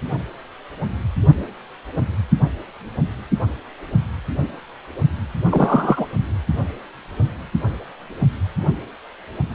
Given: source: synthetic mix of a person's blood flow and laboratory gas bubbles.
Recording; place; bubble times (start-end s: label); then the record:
Doppler ultrasound of blood flow; precordium
5.49-6.06 s: bubbles
From the record:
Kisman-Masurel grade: 113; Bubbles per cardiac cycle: 1 to 2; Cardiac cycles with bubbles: 1 to 10%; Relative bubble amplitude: loud (0.450 to 0.775); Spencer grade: 1 (occasional bubble signal discernible with the cardiac motion signal, with majority of cardiac periods free of bubbles); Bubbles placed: only in the low amplitude regions of the cardiac cycle